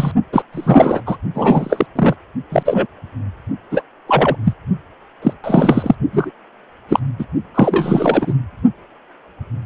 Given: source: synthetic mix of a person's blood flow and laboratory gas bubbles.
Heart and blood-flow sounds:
Doppler ultrasound of blood flow; precordium
0.00-0.11 s: bubbles
0.32-0.42 s: bubbles
0.52-1.01 s: bubbles
1.06-1.17 s: bubbles
1.34-1.86 s: bubbles
1.95-2.14 s: bubbles
2.51-2.87 s: bubbles
3.71-3.82 s: bubbles
4.07-4.36 s: bubbles
4.44-4.54 s: bubbles
5.21-5.33 s: bubbles
5.43-5.95 s: bubbles
6.12-6.30 s: bubbles
6.88-7.00 s: bubbles
7.18-7.25 s: bubbles
7.54-8.34 s: bubbles
From the record:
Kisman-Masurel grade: 233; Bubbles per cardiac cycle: several, 3 to 8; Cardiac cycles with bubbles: 50 to 99%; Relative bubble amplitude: loud (0.450 to 0.775); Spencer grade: 3 (all of the cardiac periods contain showers or single bubble signals, but not dominating or overriding the cardiac motion signals); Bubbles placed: only in the low amplitude regions of the cardiac cycle

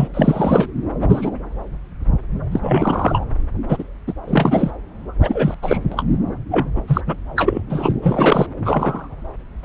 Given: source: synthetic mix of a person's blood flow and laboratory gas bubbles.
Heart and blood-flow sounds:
Doppler ultrasound of blood flow; subclavian vein
0.00-0.08 s: bubbles
0.14-0.68 s: bubbles
1.02-1.30 s: bubbles
2.51-2.60 s: bubbles
2.63-3.26 s: bubbles
3.69-3.83 s: bubbles
4.07-4.13 s: bubbles
4.27-4.71 s: bubbles
5.20-5.54 s: bubbles
5.62-5.77 s: bubbles
5.92-6.04 s: bubbles
6.51-6.70 s: bubbles
6.75-6.81 s: bubbles
6.88-7.01 s: bubbles
7.06-7.17 s: bubbles
7.36-7.62 s: bubbles
7.70-7.93 s: bubbles
8.02-8.47 s: bubbles
8.65-9.09 s: bubbles
From the record:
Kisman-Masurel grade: 233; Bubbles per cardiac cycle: several, 3 to 8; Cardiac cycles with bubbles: 50 to 99%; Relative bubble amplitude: loud (0.450 to 0.775); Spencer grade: 3 (all of the cardiac periods contain showers or single bubble signals, but not dominating or overriding the cardiac motion signals); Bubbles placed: anywhere in the cardiac cycle

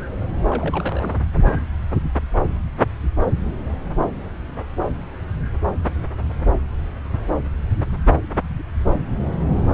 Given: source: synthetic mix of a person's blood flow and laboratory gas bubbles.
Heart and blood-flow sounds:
Doppler ultrasound of blood flow; subclavian vein
0.50-1.16 s: bubbles
From the record:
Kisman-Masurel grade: 211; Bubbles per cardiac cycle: several, 3 to 8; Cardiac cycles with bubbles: 1 to 10%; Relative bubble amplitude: barely perceptible (0.100 to 0.250); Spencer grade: 1 (occasional bubble signal discernible with the cardiac motion signal, with majority of cardiac periods free of bubbles); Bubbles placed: anywhere in the cardiac cycle

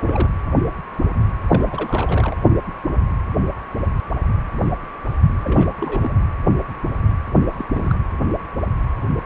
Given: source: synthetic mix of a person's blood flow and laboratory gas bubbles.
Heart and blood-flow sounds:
Doppler ultrasound of blood flow; precordium
0.00-0.29 s: bubbles
1.47-2.37 s: bubbles
5.43-5.75 s: bubbles
5.81-6.12 s: bubbles
7.53-7.65 s: bubbles
7.74-7.95 s: bubbles
From the record:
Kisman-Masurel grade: 221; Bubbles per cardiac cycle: several, 3 to 8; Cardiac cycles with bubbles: 10 to 50%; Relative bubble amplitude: barely perceptible (0.100 to 0.250); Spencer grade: 2 (many but less than half of the cardiac periods contain bubble signals, singularly or in groups); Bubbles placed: anywhere in the cardiac cycle

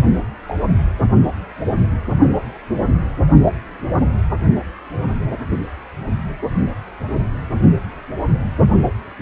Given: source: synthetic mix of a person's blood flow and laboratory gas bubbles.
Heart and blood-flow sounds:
Doppler ultrasound of blood flow; precordium
0.00-0.05 s: bubbles
0.48-0.55 s: bubbles
From the record:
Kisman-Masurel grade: 111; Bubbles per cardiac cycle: 1 to 2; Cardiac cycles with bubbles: 1 to 10%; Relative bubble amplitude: barely perceptible (0.100 to 0.250); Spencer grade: 1 (occasional bubble signal discernible with the cardiac motion signal, with majority of cardiac periods free of bubbles); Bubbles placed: anywhere in the cardiac cycle

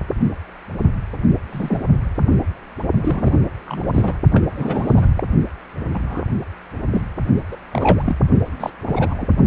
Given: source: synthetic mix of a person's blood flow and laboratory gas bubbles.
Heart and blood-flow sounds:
Doppler ultrasound of blood flow; precordium
1.47-1.83 s: bubbles
3.00-3.34 s: bubbles
3.67-4.16 s: bubbles
4.32-4.44 s: bubbles
4.55-5.08 s: bubbles
5.16-5.26 s: bubbles
5.92-6.25 s: bubbles
6.91-7.02 s: bubbles
7.51-7.56 s: bubbles
7.72-8.02 s: bubbles
8.05-8.15 s: bubbles
8.59-8.70 s: bubbles
8.81-9.27 s: bubbles
From the record:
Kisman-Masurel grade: 222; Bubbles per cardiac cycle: several, 3 to 8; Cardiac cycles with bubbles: 10 to 50%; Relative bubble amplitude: moderate (0.250 to 0.450); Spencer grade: 2 (many but less than half of the cardiac periods contain bubble signals, singularly or in groups); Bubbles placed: only in the low amplitude regions of the cardiac cycle

